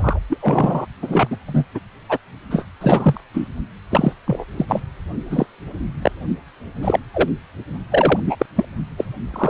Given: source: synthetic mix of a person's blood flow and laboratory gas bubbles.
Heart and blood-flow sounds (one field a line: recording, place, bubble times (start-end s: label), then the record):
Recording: Doppler ultrasound of blood flow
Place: precordium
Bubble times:
0.00-0.19 s: bubbles
0.29-0.38 s: bubbles
0.40-0.87 s: bubbles
1.02-1.28 s: bubbles
1.30-1.36 s: bubbles
1.47-1.65 s: bubbles
1.74-1.80 s: bubbles
2.08-2.17 s: bubbles
2.50-2.65 s: bubbles
2.81-3.20 s: bubbles
3.34-3.47 s: bubbles
3.90-4.13 s: bubbles
4.26-4.45 s: bubbles
4.57-4.66 s: bubbles
4.68-4.80 s: bubbles
5.29-5.46 s: bubbles
6.02-6.12 s: bubbles
6.82-7.00 s: bubbles
7.14-7.29 s: bubbles
7.91-8.21 s: bubbles
8.26-8.36 s: bubbles
8.39-8.46 s: bubbles
8.55-8.65 s: bubbles
8.97-9.05 s: bubbles
9.33-9.49 s: bubbles
From the record:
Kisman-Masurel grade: 243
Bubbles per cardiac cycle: several, 3 to 8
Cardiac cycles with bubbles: 100%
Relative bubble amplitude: loud (0.450 to 0.775)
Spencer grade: 3 (all of the cardiac periods contain showers or single bubble signals, but not dominating or overriding the cardiac motion signals)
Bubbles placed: only in the low amplitude regions of the cardiac cycle